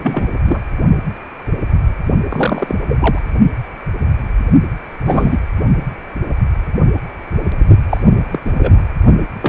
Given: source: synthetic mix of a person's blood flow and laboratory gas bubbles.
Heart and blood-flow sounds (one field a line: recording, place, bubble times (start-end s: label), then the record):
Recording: Doppler ultrasound of blood flow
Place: precordium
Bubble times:
0.00-0.32 s: bubbles
0.45-0.59 s: bubbles
2.29-2.75 s: bubbles
2.89-3.19 s: bubbles
5.05-5.39 s: bubbles
7.89-8.01 s: bubbles
8.31-8.39 s: bubbles
8.45-8.51 s: bubbles
8.54-8.82 s: bubbles
9.41-9.48 s: bubbles
From the record:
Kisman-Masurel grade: 223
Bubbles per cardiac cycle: several, 3 to 8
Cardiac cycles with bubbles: 10 to 50%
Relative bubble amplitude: loud (0.450 to 0.775)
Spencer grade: 2 (many but less than half of the cardiac periods contain bubble signals, singularly or in groups)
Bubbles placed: only in the low amplitude regions of the cardiac cycle